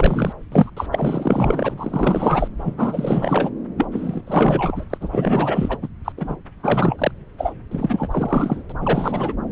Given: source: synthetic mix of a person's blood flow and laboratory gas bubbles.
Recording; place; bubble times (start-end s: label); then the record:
Doppler ultrasound of blood flow; subclavian vein
0.00-0.33 s: bubbles
0.52-0.70 s: bubbles
0.77-0.86 s: bubbles
0.92-1.75 s: bubbles
1.77-2.48 s: bubbles
2.58-3.51 s: bubbles
3.77-3.87 s: bubbles
3.91-4.22 s: bubbles
4.26-4.85 s: bubbles
4.89-4.97 s: bubbles
5.00-5.78 s: bubbles
5.81-5.88 s: bubbles
6.04-6.12 s: bubbles
6.17-6.35 s: bubbles
6.63-7.11 s: bubbles
7.38-7.53 s: bubbles
7.71-8.08 s: bubbles
8.11-8.62 s: bubbles
8.70-8.72 s: bubbles
8.80-9.34 s: bubbles
From the record:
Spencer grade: 4 (maximum detectable bubble signal sounding continuously throughout systole and diastole of every cardiac period, and overriding the amplitude of the normal cardiac signals); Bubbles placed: anywhere in the cardiac cycle